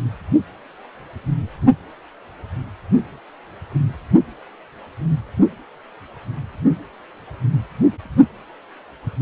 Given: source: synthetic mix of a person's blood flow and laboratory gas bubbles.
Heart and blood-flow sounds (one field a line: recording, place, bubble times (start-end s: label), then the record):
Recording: Doppler ultrasound of blood flow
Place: precordium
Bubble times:
no bubbles
From the record:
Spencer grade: 0 (complete lack of bubble signals)